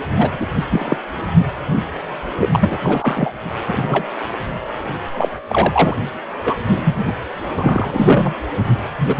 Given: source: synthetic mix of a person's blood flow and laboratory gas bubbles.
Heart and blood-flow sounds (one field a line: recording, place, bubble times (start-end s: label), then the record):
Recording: Doppler ultrasound of blood flow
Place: precordium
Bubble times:
0.17-0.46 s: bubbles
0.55-0.65 s: bubbles
0.69-0.98 s: bubbles
1.38-1.46 s: bubbles
2.40-2.49 s: bubbles
2.52-2.77 s: bubbles
2.81-3.33 s: bubbles
3.67-4.09 s: bubbles
5.16-5.29 s: bubbles
5.48-5.96 s: bubbles
6.45-6.55 s: bubbles
6.69-7.13 s: bubbles
7.58-8.34 s: bubbles
8.98-9.20 s: bubbles
From the record:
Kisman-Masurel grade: 233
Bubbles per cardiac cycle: several, 3 to 8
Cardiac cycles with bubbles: 50 to 99%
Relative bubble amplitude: loud (0.450 to 0.775)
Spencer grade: 3 (all of the cardiac periods contain showers or single bubble signals, but not dominating or overriding the cardiac motion signals)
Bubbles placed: anywhere in the cardiac cycle